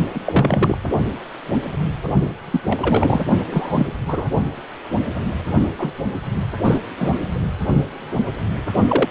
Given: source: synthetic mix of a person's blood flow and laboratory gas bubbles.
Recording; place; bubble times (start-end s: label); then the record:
Doppler ultrasound of blood flow; precordium
0.14-0.20 s: bubbles
0.24-0.77 s: bubbles
2.50-2.60 s: bubbles
2.66-3.25 s: bubbles
3.51-3.87 s: bubbles
4.07-4.26 s: bubbles
5.79-5.93 s: bubbles
6.63-6.87 s: bubbles
6.97-7.18 s: bubbles
8.88-9.08 s: bubbles
From the record:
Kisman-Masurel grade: 233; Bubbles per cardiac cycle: several, 3 to 8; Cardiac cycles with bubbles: 50 to 99%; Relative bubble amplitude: loud (0.450 to 0.775); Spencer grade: 3 (all of the cardiac periods contain showers or single bubble signals, but not dominating or overriding the cardiac motion signals); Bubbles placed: only in the low amplitude regions of the cardiac cycle